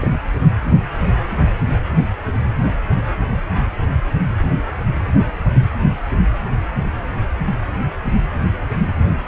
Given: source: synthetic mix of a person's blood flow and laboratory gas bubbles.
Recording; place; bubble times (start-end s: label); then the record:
Doppler ultrasound of blood flow; precordium
0.01-0.21 s: bubbles
From the record:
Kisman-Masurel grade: 211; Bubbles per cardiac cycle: several, 3 to 8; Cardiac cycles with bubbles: 1 to 10%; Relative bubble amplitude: barely perceptible (0.100 to 0.250); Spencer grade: 1 (occasional bubble signal discernible with the cardiac motion signal, with majority of cardiac periods free of bubbles); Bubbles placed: anywhere in the cardiac cycle